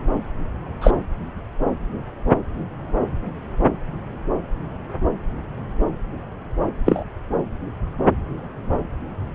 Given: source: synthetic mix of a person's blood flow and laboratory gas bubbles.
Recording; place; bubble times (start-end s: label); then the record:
Doppler ultrasound of blood flow; subclavian vein
0.81-0.92 s: bubbles
6.86-7.04 s: bubbles
From the record:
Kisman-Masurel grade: 113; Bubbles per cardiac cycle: 1 to 2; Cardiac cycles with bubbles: 1 to 10%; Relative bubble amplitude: loud (0.450 to 0.775); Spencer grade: 1 (occasional bubble signal discernible with the cardiac motion signal, with majority of cardiac periods free of bubbles); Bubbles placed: anywhere in the cardiac cycle